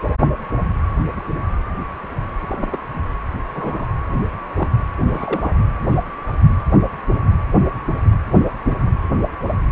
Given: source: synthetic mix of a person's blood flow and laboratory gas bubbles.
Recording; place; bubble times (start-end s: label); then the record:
Doppler ultrasound of blood flow; precordium
2.48-2.79 s: bubbles
3.55-3.85 s: bubbles
4.55-4.68 s: bubbles
5.03-5.55 s: bubbles
From the record:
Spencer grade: 2 (many but less than half of the cardiac periods contain bubble signals, singularly or in groups); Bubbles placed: anywhere in the cardiac cycle